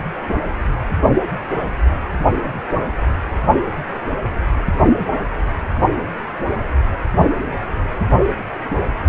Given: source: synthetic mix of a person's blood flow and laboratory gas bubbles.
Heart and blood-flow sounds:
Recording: Doppler ultrasound of blood flow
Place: precordium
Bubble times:
no bubbles
From the record:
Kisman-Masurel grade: 000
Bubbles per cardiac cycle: 0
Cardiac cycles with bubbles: 0%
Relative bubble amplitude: no bubbles discernible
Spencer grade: 0 (complete lack of bubble signals)

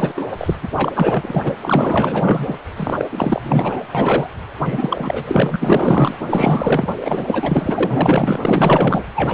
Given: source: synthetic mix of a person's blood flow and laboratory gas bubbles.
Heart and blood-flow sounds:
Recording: Doppler ultrasound of blood flow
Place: precordium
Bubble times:
0.00-0.12 s: bubbles
0.17-0.27 s: bubbles
0.37-0.55 s: bubbles
0.62-0.69 s: bubbles
0.76-0.93 s: bubbles
0.95-1.55 s: bubbles
1.61-2.54 s: bubbles
2.76-2.93 s: bubbles
2.99-3.05 s: bubbles
3.12-3.82 s: bubbles
3.95-4.28 s: bubbles
4.64-5.56 s: bubbles
5.59-6.15 s: bubbles
6.29-6.90 s: bubbles
7.00-8.39 s: bubbles
8.42-9.04 s: bubbles
9.14-9.34 s: bubbles
From the record:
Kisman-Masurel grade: 444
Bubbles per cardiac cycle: continuous sound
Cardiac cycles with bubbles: 100%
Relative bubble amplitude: maximal (0.775 to 0.999)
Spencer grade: 4 (maximum detectable bubble signal sounding continuously throughout systole and diastole of every cardiac period, and overriding the amplitude of the normal cardiac signals)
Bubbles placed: anywhere in the cardiac cycle

